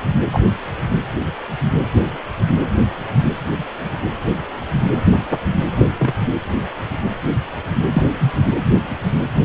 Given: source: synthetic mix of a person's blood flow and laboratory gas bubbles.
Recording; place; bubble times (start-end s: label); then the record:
Doppler ultrasound of blood flow; precordium
0.33-0.40 s: bubbles
5.78-5.86 s: bubbles
5.98-6.13 s: bubbles
7.92-8.03 s: bubbles
8.19-8.31 s: bubbles
From the record:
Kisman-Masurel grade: 123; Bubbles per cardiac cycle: 1 to 2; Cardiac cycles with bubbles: 10 to 50%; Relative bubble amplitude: loud (0.450 to 0.775); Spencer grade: 2 (many but less than half of the cardiac periods contain bubble signals, singularly or in groups); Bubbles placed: anywhere in the cardiac cycle